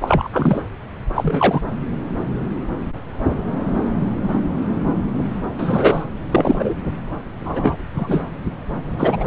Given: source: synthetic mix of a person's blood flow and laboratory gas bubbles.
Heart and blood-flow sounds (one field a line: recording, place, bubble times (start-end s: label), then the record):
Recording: Doppler ultrasound of blood flow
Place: subclavian vein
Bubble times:
0.01-0.29 s: bubbles
0.33-0.61 s: bubbles
1.14-1.62 s: bubbles
5.58-6.02 s: bubbles
6.31-6.74 s: bubbles
7.40-7.77 s: bubbles
7.95-8.24 s: bubbles
8.98-9.27 s: bubbles
From the record:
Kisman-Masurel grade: 223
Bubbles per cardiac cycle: several, 3 to 8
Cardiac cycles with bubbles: 10 to 50%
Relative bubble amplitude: loud (0.450 to 0.775)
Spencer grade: 2 (many but less than half of the cardiac periods contain bubble signals, singularly or in groups)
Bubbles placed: anywhere in the cardiac cycle